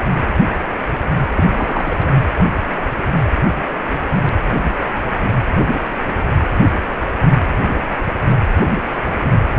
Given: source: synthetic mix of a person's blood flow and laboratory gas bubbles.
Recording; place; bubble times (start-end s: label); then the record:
Doppler ultrasound of blood flow; precordium
1.29-2.11 s: bubbles
From the record:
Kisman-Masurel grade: 222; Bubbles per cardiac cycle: several, 3 to 8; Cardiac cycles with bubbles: 10 to 50%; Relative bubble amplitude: moderate (0.250 to 0.450); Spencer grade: 2 (many but less than half of the cardiac periods contain bubble signals, singularly or in groups); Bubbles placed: anywhere in the cardiac cycle